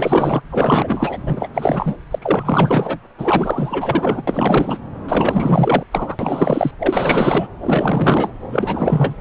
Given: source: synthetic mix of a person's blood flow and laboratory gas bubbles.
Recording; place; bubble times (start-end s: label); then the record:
Doppler ultrasound of blood flow; subclavian vein
0.00-0.42 s: bubbles
0.50-1.18 s: bubbles
1.26-1.48 s: bubbles
1.54-1.96 s: bubbles
2.10-2.19 s: bubbles
2.22-3.00 s: bubbles
3.18-4.22 s: bubbles
4.27-4.77 s: bubbles
5.08-5.83 s: bubbles
5.91-6.17 s: bubbles
6.19-6.71 s: bubbles
6.79-7.47 s: bubbles
7.62-8.31 s: bubbles
8.50-9.15 s: bubbles
From the record:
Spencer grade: 4 (maximum detectable bubble signal sounding continuously throughout systole and diastole of every cardiac period, and overriding the amplitude of the normal cardiac signals); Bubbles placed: anywhere in the cardiac cycle